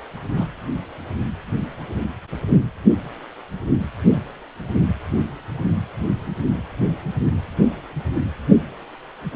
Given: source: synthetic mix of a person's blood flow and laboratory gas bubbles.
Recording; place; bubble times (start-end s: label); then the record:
Doppler ultrasound of blood flow; precordium
0.35-0.47 s: bubbles
From the record:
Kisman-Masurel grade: 111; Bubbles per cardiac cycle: 1 to 2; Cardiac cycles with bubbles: 1 to 10%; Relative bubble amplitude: barely perceptible (0.100 to 0.250); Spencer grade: 1 (occasional bubble signal discernible with the cardiac motion signal, with majority of cardiac periods free of bubbles); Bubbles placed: anywhere in the cardiac cycle